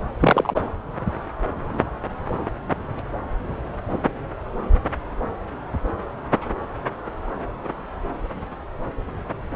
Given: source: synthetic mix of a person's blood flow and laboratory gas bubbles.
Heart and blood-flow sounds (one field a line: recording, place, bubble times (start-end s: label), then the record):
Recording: Doppler ultrasound of blood flow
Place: subclavian vein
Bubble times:
0.19-0.61 s: bubbles
From the record:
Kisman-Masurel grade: 113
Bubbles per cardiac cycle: 1 to 2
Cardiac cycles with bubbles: 1 to 10%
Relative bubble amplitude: loud (0.450 to 0.775)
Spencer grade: 1 (occasional bubble signal discernible with the cardiac motion signal, with majority of cardiac periods free of bubbles)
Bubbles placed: anywhere in the cardiac cycle